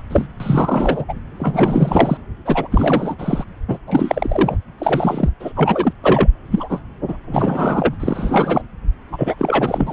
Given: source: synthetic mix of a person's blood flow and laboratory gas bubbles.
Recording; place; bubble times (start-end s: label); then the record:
Doppler ultrasound of blood flow; subclavian vein
0.00-0.02 s: bubbles
0.10-0.28 s: bubbles
0.40-1.04 s: bubbles
1.08-1.14 s: bubbles
1.39-2.18 s: bubbles
2.45-2.68 s: bubbles
2.71-3.44 s: bubbles
3.68-3.78 s: bubbles
3.87-4.57 s: bubbles
4.78-5.29 s: bubbles
5.39-5.52 s: bubbles
5.55-5.93 s: bubbles
6.04-6.28 s: bubbles
6.50-6.79 s: bubbles
7.07-7.17 s: bubbles
7.27-7.95 s: bubbles
7.99-8.62 s: bubbles
9.12-9.35 s: bubbles
9.38-9.92 s: bubbles
From the record:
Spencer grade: 3 (all of the cardiac periods contain showers or single bubble signals, but not dominating or overriding the cardiac motion signals); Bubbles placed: anywhere in the cardiac cycle